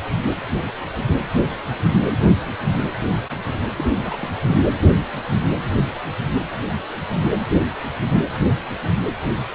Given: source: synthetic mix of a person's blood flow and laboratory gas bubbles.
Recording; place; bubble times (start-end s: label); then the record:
Doppler ultrasound of blood flow; precordium
3.78-3.84 s: bubbles
3.97-4.33 s: bubbles
4.47-4.58 s: bubbles
From the record:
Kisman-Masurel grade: 211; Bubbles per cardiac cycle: several, 3 to 8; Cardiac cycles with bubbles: 1 to 10%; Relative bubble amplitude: barely perceptible (0.100 to 0.250); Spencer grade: 1 (occasional bubble signal discernible with the cardiac motion signal, with majority of cardiac periods free of bubbles); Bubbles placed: anywhere in the cardiac cycle